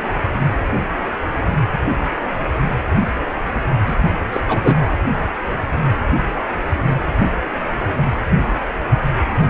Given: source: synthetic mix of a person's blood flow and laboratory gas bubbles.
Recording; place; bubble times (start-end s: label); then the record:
Doppler ultrasound of blood flow; precordium
3.86-3.95 s: bubbles
4.32-4.41 s: bubbles
4.49-4.61 s: bubbles
4.64-4.75 s: bubbles
From the record:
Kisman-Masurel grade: 213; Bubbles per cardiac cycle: several, 3 to 8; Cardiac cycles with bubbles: 1 to 10%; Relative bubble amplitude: loud (0.450 to 0.775); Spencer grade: 1 (occasional bubble signal discernible with the cardiac motion signal, with majority of cardiac periods free of bubbles); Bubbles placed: anywhere in the cardiac cycle